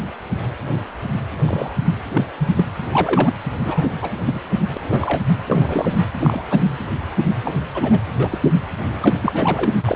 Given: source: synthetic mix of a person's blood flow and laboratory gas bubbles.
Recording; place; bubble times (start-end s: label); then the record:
Doppler ultrasound of blood flow; precordium
1.46-1.73 s: bubbles
2.08-2.25 s: bubbles
2.38-2.52 s: bubbles
2.56-2.65 s: bubbles
2.92-3.33 s: bubbles
3.65-3.89 s: bubbles
4.02-4.18 s: bubbles
4.26-4.41 s: bubbles
4.74-4.77 s: bubbles
4.90-5.21 s: bubbles
5.46-6.08 s: bubbles
6.18-6.60 s: bubbles
7.45-7.54 s: bubbles
7.74-7.99 s: bubbles
8.18-8.38 s: bubbles
9.02-9.18 s: bubbles
9.21-9.72 s: bubbles
9.82-9.96 s: bubbles
From the record:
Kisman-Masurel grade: 232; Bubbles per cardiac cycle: several, 3 to 8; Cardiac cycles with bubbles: 50 to 99%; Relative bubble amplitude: moderate (0.250 to 0.450); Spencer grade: 3 (all of the cardiac periods contain showers or single bubble signals, but not dominating or overriding the cardiac motion signals); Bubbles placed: anywhere in the cardiac cycle